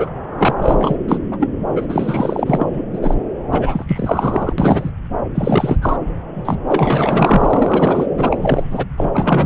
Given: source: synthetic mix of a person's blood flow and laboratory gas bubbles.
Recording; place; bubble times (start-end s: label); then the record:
Doppler ultrasound of blood flow; subclavian vein
0.00-0.11 s: bubbles
0.38-0.54 s: bubbles
0.56-0.96 s: bubbles
1.08-1.19 s: bubbles
1.30-1.49 s: bubbles
1.76-2.70 s: bubbles
2.73-2.85 s: bubbles
2.93-3.15 s: bubbles
3.52-3.84 s: bubbles
3.87-4.53 s: bubbles
4.58-4.91 s: bubbles
5.34-5.78 s: bubbles
5.82-5.97 s: bubbles
6.33-8.06 s: bubbles
8.17-8.85 s: bubbles
8.97-9.08 s: bubbles
9.13-9.46 s: bubbles
From the record:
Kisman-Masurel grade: 343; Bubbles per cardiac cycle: rolling drumbeat, 9 or more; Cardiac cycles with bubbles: 100%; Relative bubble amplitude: loud (0.450 to 0.775); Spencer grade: 3 (all of the cardiac periods contain showers or single bubble signals, but not dominating or overriding the cardiac motion signals); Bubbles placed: anywhere in the cardiac cycle